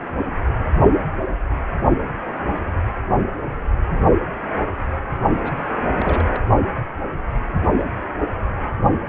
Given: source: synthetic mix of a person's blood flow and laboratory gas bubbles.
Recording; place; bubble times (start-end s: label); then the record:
Doppler ultrasound of blood flow; precordium
5.43-5.67 s: bubbles
5.97-6.41 s: bubbles
From the record:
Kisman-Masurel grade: 221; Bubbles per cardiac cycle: several, 3 to 8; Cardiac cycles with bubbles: 10 to 50%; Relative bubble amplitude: barely perceptible (0.100 to 0.250); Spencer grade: 2 (many but less than half of the cardiac periods contain bubble signals, singularly or in groups); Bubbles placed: only in the low amplitude regions of the cardiac cycle